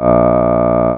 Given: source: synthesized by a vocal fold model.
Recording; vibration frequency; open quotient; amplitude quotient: sustained vowel; 60 Hz; 0.2; 1